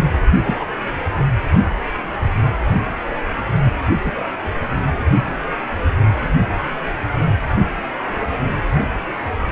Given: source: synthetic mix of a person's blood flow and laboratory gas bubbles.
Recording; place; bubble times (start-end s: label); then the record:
Doppler ultrasound of blood flow; precordium
0.44-0.57 s: bubbles
0.60-0.65 s: bubbles
4.05-4.12 s: bubbles
From the record:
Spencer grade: 2 (many but less than half of the cardiac periods contain bubble signals, singularly or in groups); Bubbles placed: only in the low amplitude regions of the cardiac cycle